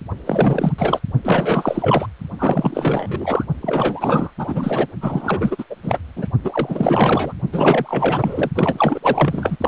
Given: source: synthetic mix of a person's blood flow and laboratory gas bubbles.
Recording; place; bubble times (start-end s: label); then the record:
Doppler ultrasound of blood flow; precordium
0.26-0.72 s: bubbles
0.78-0.98 s: bubbles
1.23-2.06 s: bubbles
2.38-3.44 s: bubbles
3.61-4.31 s: bubbles
4.38-4.87 s: bubbles
5.01-5.64 s: bubbles
5.70-5.75 s: bubbles
5.83-5.99 s: bubbles
6.16-6.27 s: bubbles
6.44-7.33 s: bubbles
7.52-8.50 s: bubbles
8.56-9.00 s: bubbles
9.03-9.56 s: bubbles
9.60-9.68 s: bubbles
From the record:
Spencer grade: 4 (maximum detectable bubble signal sounding continuously throughout systole and diastole of every cardiac period, and overriding the amplitude of the normal cardiac signals); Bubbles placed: only in the low amplitude regions of the cardiac cycle